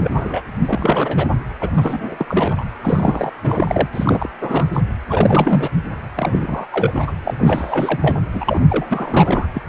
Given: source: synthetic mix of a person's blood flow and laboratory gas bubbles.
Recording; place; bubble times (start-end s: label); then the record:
Doppler ultrasound of blood flow; precordium
0.00-0.41 s: bubbles
0.66-1.27 s: bubbles
1.60-1.70 s: bubbles
1.76-2.25 s: bubbles
2.28-2.65 s: bubbles
2.81-3.31 s: bubbles
3.44-3.87 s: bubbles
3.93-4.29 s: bubbles
4.41-4.67 s: bubbles
4.73-4.81 s: bubbles
5.08-5.69 s: bubbles
6.17-6.66 s: bubbles
6.71-7.12 s: bubbles
7.25-7.34 s: bubbles
7.38-8.17 s: bubbles
8.33-8.60 s: bubbles
8.70-8.86 s: bubbles
8.89-9.47 s: bubbles
9.54-9.62 s: bubbles
From the record:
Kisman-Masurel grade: 342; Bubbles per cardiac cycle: rolling drumbeat, 9 or more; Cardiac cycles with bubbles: 100%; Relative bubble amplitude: moderate (0.250 to 0.450); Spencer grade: 3 (all of the cardiac periods contain showers or single bubble signals, but not dominating or overriding the cardiac motion signals); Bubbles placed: anywhere in the cardiac cycle